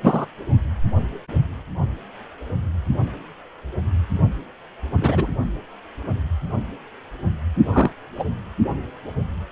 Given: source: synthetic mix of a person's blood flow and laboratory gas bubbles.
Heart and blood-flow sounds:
Doppler ultrasound of blood flow; precordium
0.03-0.26 s: bubbles
5.00-5.27 s: bubbles
7.72-7.91 s: bubbles
8.17-8.25 s: bubbles
From the record:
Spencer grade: 2 (many but less than half of the cardiac periods contain bubble signals, singularly or in groups); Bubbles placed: only in the low amplitude regions of the cardiac cycle

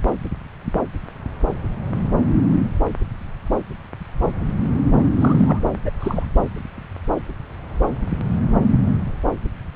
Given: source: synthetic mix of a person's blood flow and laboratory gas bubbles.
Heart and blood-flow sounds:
Doppler ultrasound of blood flow; subclavian vein
5.20-5.60 s: bubbles
5.85-5.91 s: bubbles
6.00-6.26 s: bubbles
From the record:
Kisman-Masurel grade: 212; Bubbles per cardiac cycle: several, 3 to 8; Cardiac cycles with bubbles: 1 to 10%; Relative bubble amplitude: moderate (0.250 to 0.450); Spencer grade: 1 (occasional bubble signal discernible with the cardiac motion signal, with majority of cardiac periods free of bubbles); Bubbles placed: anywhere in the cardiac cycle

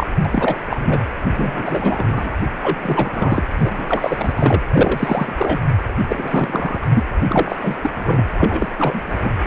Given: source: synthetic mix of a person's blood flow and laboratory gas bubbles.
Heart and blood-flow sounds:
Doppler ultrasound of blood flow; precordium
0.00-0.07 s: bubbles
0.25-0.58 s: bubbles
0.69-1.04 s: bubbles
1.35-2.31 s: bubbles
2.62-2.77 s: bubbles
2.81-3.46 s: bubbles
3.57-4.62 s: bubbles
4.73-5.35 s: bubbles
5.38-5.61 s: bubbles
6.08-6.78 s: bubbles
6.82-6.86 s: bubbles
6.95-7.04 s: bubbles
7.29-7.56 s: bubbles
7.62-7.78 s: bubbles
7.83-7.91 s: bubbles
7.95-8.23 s: bubbles
8.38-8.68 s: bubbles
8.79-9.03 s: bubbles
9.05-9.31 s: bubbles
From the record:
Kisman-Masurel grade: 343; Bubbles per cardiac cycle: rolling drumbeat, 9 or more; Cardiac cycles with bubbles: 100%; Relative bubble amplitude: loud (0.450 to 0.775); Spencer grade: 3 (all of the cardiac periods contain showers or single bubble signals, but not dominating or overriding the cardiac motion signals); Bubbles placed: anywhere in the cardiac cycle

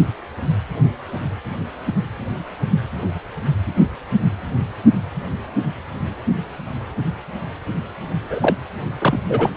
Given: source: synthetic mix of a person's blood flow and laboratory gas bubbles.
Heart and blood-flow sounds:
Doppler ultrasound of blood flow; precordium
8.18-8.55 s: bubbles
8.98-9.19 s: bubbles
9.29-9.51 s: bubbles
From the record:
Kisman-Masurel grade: 213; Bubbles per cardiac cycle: several, 3 to 8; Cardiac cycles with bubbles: 1 to 10%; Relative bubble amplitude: loud (0.450 to 0.775); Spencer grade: 1 (occasional bubble signal discernible with the cardiac motion signal, with majority of cardiac periods free of bubbles); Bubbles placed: anywhere in the cardiac cycle

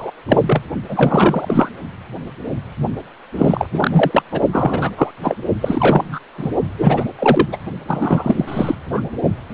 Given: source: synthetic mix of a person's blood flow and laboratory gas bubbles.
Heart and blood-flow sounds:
Doppler ultrasound of blood flow; precordium
0.00-0.11 s: bubbles
0.28-0.43 s: bubbles
0.45-0.61 s: bubbles
0.88-1.69 s: bubbles
3.38-3.67 s: bubbles
3.73-4.22 s: bubbles
4.31-4.42 s: bubbles
4.52-4.91 s: bubbles
4.97-5.11 s: bubbles
5.22-5.37 s: bubbles
5.61-6.19 s: bubbles
6.37-6.50 s: bubbles
6.78-7.04 s: bubbles
7.18-7.62 s: bubbles
7.87-8.75 s: bubbles
8.92-9.02 s: bubbles
From the record:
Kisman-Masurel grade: 333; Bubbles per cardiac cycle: rolling drumbeat, 9 or more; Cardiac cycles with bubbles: 50 to 99%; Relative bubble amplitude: loud (0.450 to 0.775); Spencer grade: 3 (all of the cardiac periods contain showers or single bubble signals, but not dominating or overriding the cardiac motion signals); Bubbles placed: only in the low amplitude regions of the cardiac cycle

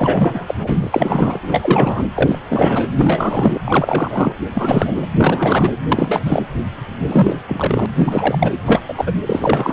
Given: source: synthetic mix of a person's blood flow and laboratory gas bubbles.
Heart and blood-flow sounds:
Doppler ultrasound of blood flow; precordium
0.00-0.44 s: bubbles
0.47-0.55 s: bubbles
0.58-1.39 s: bubbles
1.42-2.03 s: bubbles
2.16-2.39 s: bubbles
2.49-2.87 s: bubbles
2.97-3.61 s: bubbles
3.64-4.36 s: bubbles
4.54-5.07 s: bubbles
5.17-5.72 s: bubbles
5.89-6.46 s: bubbles
7.06-7.38 s: bubbles
7.48-7.86 s: bubbles
7.96-8.51 s: bubbles
8.67-8.81 s: bubbles
8.88-9.12 s: bubbles
9.26-9.73 s: bubbles
From the record:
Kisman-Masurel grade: 343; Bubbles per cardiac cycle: rolling drumbeat, 9 or more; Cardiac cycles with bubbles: 100%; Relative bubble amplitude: loud (0.450 to 0.775); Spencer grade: 3 (all of the cardiac periods contain showers or single bubble signals, but not dominating or overriding the cardiac motion signals); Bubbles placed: anywhere in the cardiac cycle

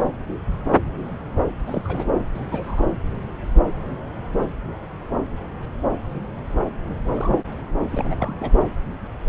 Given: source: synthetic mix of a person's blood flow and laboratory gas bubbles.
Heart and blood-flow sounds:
Doppler ultrasound of blood flow; subclavian vein
1.67-2.08 s: bubbles
2.35-2.90 s: bubbles
7.13-7.38 s: bubbles
7.92-8.51 s: bubbles
From the record:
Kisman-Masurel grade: 221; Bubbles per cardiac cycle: several, 3 to 8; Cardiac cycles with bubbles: 10 to 50%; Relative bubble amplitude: barely perceptible (0.100 to 0.250); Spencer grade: 2 (many but less than half of the cardiac periods contain bubble signals, singularly or in groups); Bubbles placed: anywhere in the cardiac cycle

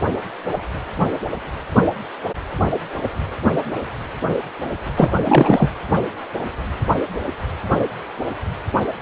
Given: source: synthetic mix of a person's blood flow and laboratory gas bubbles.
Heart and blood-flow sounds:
Doppler ultrasound of blood flow; precordium
4.96-5.10 s: bubbles
5.25-5.69 s: bubbles
From the record:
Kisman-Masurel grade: 213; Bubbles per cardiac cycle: several, 3 to 8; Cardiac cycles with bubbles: 1 to 10%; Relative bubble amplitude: loud (0.450 to 0.775); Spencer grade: 1 (occasional bubble signal discernible with the cardiac motion signal, with majority of cardiac periods free of bubbles); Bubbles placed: anywhere in the cardiac cycle

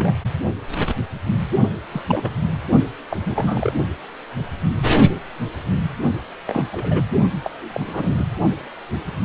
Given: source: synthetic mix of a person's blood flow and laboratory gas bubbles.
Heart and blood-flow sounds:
Doppler ultrasound of blood flow; precordium
0.00-0.14 s: bubbles
1.91-2.02 s: bubbles
2.07-2.35 s: bubbles
2.43-2.49 s: bubbles
3.10-3.73 s: bubbles
6.48-6.64 s: bubbles
6.69-7.04 s: bubbles
7.44-8.14 s: bubbles
8.18-8.26 s: bubbles
From the record:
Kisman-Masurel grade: 232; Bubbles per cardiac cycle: several, 3 to 8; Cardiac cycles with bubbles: 50 to 99%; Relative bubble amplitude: moderate (0.250 to 0.450); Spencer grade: 3 (all of the cardiac periods contain showers or single bubble signals, but not dominating or overriding the cardiac motion signals); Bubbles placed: only in the low amplitude regions of the cardiac cycle

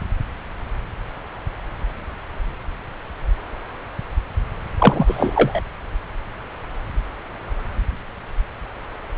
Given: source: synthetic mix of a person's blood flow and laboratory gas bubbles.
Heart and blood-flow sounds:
Doppler ultrasound of blood flow; subclavian vein
4.79-5.60 s: bubbles
From the record:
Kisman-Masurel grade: 213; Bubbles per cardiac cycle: several, 3 to 8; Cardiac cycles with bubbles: 1 to 10%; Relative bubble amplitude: loud (0.450 to 0.775); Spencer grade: 1 (occasional bubble signal discernible with the cardiac motion signal, with majority of cardiac periods free of bubbles); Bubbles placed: anywhere in the cardiac cycle

